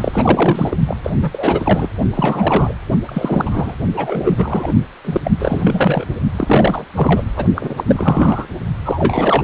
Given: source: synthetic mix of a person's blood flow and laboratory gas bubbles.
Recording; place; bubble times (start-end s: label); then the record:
Doppler ultrasound of blood flow; precordium
0.01-0.77 s: bubbles
0.86-0.97 s: bubbles
1.04-1.10 s: bubbles
1.22-1.88 s: bubbles
2.14-2.75 s: bubbles
3.07-3.75 s: bubbles
3.94-4.72 s: bubbles
5.04-5.21 s: bubbles
5.24-5.31 s: bubbles
5.39-6.05 s: bubbles
6.35-6.84 s: bubbles
6.95-7.23 s: bubbles
7.37-7.46 s: bubbles
7.55-7.74 s: bubbles
7.76-7.84 s: bubbles
7.87-8.48 s: bubbles
8.84-9.44 s: bubbles
From the record:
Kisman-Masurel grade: 342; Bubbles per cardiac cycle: rolling drumbeat, 9 or more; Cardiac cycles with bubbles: 100%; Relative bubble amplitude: moderate (0.250 to 0.450); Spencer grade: 3 (all of the cardiac periods contain showers or single bubble signals, but not dominating or overriding the cardiac motion signals); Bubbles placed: only in the low amplitude regions of the cardiac cycle